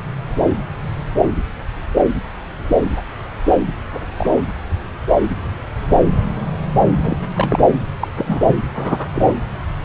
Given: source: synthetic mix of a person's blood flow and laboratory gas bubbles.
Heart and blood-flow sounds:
Doppler ultrasound of blood flow; subclavian vein
3.93-3.99 s: bubbles
4.17-4.30 s: bubbles
4.34-4.44 s: bubbles
6.96-7.18 s: bubbles
7.35-7.71 s: bubbles
8.00-8.07 s: bubbles
8.16-8.55 s: bubbles
8.75-9.07 s: bubbles
9.13-9.33 s: bubbles
From the record:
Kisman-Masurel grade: 222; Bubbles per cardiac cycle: several, 3 to 8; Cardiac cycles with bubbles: 10 to 50%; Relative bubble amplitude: moderate (0.250 to 0.450); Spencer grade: 2 (many but less than half of the cardiac periods contain bubble signals, singularly or in groups); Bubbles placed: anywhere in the cardiac cycle

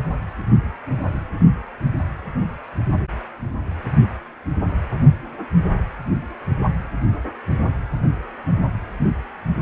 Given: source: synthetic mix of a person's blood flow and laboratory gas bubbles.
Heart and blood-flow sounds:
Doppler ultrasound of blood flow; precordium
no bubbles
From the record:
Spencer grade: 0 (complete lack of bubble signals)

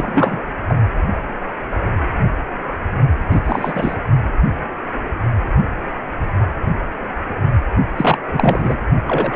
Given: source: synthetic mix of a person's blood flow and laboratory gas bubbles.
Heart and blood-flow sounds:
Doppler ultrasound of blood flow; precordium
0.00-0.42 s: bubbles
0.69-0.74 s: bubbles
3.30-3.41 s: bubbles
3.45-3.96 s: bubbles
7.97-8.18 s: bubbles
8.32-8.76 s: bubbles
9.07-9.35 s: bubbles
From the record:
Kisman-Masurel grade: 233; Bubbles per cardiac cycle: several, 3 to 8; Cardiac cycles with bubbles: 50 to 99%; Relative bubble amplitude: loud (0.450 to 0.775); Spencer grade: 3 (all of the cardiac periods contain showers or single bubble signals, but not dominating or overriding the cardiac motion signals); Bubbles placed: only in the low amplitude regions of the cardiac cycle

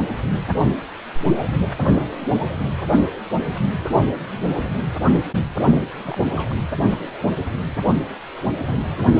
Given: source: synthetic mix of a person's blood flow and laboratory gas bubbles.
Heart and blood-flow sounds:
Doppler ultrasound of blood flow; precordium
6.03-6.17 s: bubbles
6.25-6.54 s: bubbles
From the record:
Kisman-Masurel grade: 211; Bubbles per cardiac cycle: several, 3 to 8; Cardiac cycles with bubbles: 1 to 10%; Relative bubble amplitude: barely perceptible (0.100 to 0.250); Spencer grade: 1 (occasional bubble signal discernible with the cardiac motion signal, with majority of cardiac periods free of bubbles); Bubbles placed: only in the low amplitude regions of the cardiac cycle

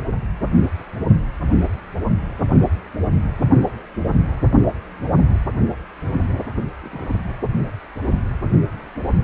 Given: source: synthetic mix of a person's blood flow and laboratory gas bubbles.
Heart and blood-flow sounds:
Doppler ultrasound of blood flow; precordium
6.81-7.20 s: bubbles
From the record:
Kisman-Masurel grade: 111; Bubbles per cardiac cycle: 1 to 2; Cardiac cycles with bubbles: 1 to 10%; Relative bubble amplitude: barely perceptible (0.100 to 0.250); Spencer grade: 1 (occasional bubble signal discernible with the cardiac motion signal, with majority of cardiac periods free of bubbles); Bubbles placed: anywhere in the cardiac cycle

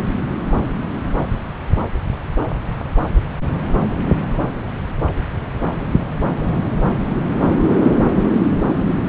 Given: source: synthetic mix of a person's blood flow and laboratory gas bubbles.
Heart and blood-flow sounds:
Doppler ultrasound of blood flow; subclavian vein
no bubbles
From the record:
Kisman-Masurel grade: 000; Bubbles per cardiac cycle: 0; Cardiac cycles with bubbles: 0%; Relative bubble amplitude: no bubbles discernible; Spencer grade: 0 (complete lack of bubble signals)

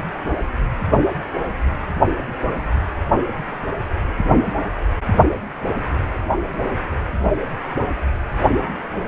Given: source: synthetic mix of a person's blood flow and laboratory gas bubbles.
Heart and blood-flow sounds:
Doppler ultrasound of blood flow; precordium
no bubbles
From the record:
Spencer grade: 0 (complete lack of bubble signals)

